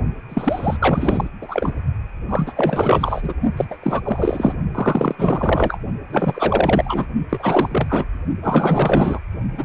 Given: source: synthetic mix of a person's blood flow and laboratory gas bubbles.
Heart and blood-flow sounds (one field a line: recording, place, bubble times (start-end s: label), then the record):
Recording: Doppler ultrasound of blood flow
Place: precordium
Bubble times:
0.29-0.77 s: bubbles
0.80-1.29 s: bubbles
1.42-1.73 s: bubbles
2.29-2.54 s: bubbles
2.56-3.34 s: bubbles
3.56-3.65 s: bubbles
3.69-3.77 s: bubbles
3.82-4.02 s: bubbles
4.04-4.57 s: bubbles
4.74-5.15 s: bubbles
5.18-5.78 s: bubbles
6.10-7.06 s: bubbles
7.29-8.07 s: bubbles
8.42-9.19 s: bubbles
9.58-9.65 s: bubbles
From the record:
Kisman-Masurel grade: 444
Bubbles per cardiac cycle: continuous sound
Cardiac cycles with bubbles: 100%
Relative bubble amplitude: maximal (0.775 to 0.999)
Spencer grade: 4 (maximum detectable bubble signal sounding continuously throughout systole and diastole of every cardiac period, and overriding the amplitude of the normal cardiac signals)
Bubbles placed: only in the low amplitude regions of the cardiac cycle